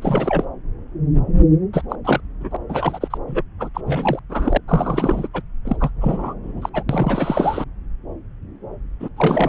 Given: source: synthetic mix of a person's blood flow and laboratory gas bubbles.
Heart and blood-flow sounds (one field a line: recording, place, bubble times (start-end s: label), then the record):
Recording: Doppler ultrasound of blood flow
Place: subclavian vein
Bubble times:
0.00-0.45 s: bubbles
1.73-1.82 s: bubbles
1.90-1.96 s: bubbles
2.04-2.21 s: bubbles
2.40-2.56 s: bubbles
2.69-3.18 s: bubbles
3.27-3.42 s: bubbles
3.59-3.69 s: bubbles
3.74-3.81 s: bubbles
3.85-4.19 s: bubbles
4.29-4.58 s: bubbles
4.68-5.28 s: bubbles
5.33-5.42 s: bubbles
5.65-5.76 s: bubbles
5.80-5.91 s: bubbles
6.01-6.33 s: bubbles
6.43-6.70 s: bubbles
6.74-6.83 s: bubbles
6.89-7.65 s: bubbles
9.00-9.09 s: bubbles
9.17-9.48 s: bubbles
From the record:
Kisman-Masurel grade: 332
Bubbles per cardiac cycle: rolling drumbeat, 9 or more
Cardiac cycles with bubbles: 50 to 99%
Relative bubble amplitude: moderate (0.250 to 0.450)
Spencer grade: 3 (all of the cardiac periods contain showers or single bubble signals, but not dominating or overriding the cardiac motion signals)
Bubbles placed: anywhere in the cardiac cycle